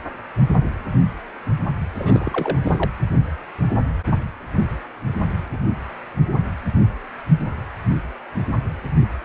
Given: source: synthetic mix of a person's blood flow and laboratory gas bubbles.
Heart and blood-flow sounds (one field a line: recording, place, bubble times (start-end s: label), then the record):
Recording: Doppler ultrasound of blood flow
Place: precordium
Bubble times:
1.93-2.58 s: bubbles
2.63-2.90 s: bubbles
From the record:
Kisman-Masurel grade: 211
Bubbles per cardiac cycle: several, 3 to 8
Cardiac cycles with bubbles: 1 to 10%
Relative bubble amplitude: barely perceptible (0.100 to 0.250)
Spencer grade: 1 (occasional bubble signal discernible with the cardiac motion signal, with majority of cardiac periods free of bubbles)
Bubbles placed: anywhere in the cardiac cycle